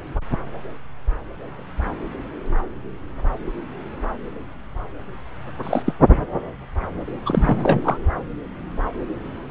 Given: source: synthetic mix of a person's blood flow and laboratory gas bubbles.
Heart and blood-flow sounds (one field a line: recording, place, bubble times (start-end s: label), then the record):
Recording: Doppler ultrasound of blood flow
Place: subclavian vein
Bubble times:
5.63-5.83 s: bubbles
5.86-5.92 s: bubbles
7.25-7.98 s: bubbles
From the record:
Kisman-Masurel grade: 222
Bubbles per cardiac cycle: several, 3 to 8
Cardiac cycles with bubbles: 10 to 50%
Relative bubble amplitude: moderate (0.250 to 0.450)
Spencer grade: 2 (many but less than half of the cardiac periods contain bubble signals, singularly or in groups)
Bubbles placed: anywhere in the cardiac cycle